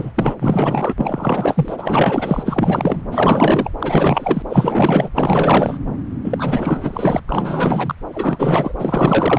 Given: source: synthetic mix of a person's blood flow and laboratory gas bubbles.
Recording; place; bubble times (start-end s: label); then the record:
Doppler ultrasound of blood flow; subclavian vein
0.00-0.10 s: bubbles
0.15-0.35 s: bubbles
0.39-0.94 s: bubbles
0.99-3.02 s: bubbles
3.12-3.70 s: bubbles
3.80-4.42 s: bubbles
4.49-5.09 s: bubbles
5.15-5.79 s: bubbles
6.24-7.20 s: bubbles
7.28-7.95 s: bubbles
8.12-8.72 s: bubbles
8.79-9.39 s: bubbles
From the record:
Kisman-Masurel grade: 444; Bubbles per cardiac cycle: continuous sound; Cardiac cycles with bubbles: 100%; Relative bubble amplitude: maximal (0.775 to 0.999); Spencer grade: 4 (maximum detectable bubble signal sounding continuously throughout systole and diastole of every cardiac period, and overriding the amplitude of the normal cardiac signals); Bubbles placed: anywhere in the cardiac cycle